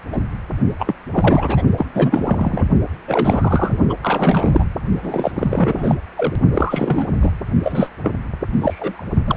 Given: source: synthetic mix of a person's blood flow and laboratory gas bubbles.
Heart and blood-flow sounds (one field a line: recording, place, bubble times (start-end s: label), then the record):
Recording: Doppler ultrasound of blood flow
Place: precordium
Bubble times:
0.12-0.22 s: bubbles
0.79-0.95 s: bubbles
1.13-1.62 s: bubbles
1.77-1.85 s: bubbles
1.93-2.65 s: bubbles
3.08-3.79 s: bubbles
3.89-3.94 s: bubbles
4.02-4.64 s: bubbles
5.02-5.31 s: bubbles
5.34-5.95 s: bubbles
6.17-6.36 s: bubbles
6.53-7.05 s: bubbles
7.21-7.31 s: bubbles
7.63-7.90 s: bubbles
8.03-8.12 s: bubbles
8.61-9.04 s: bubbles
9.26-9.37 s: bubbles
From the record:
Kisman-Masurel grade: 343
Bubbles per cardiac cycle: rolling drumbeat, 9 or more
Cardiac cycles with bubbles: 100%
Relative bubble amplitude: loud (0.450 to 0.775)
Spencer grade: 3 (all of the cardiac periods contain showers or single bubble signals, but not dominating or overriding the cardiac motion signals)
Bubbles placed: only in the low amplitude regions of the cardiac cycle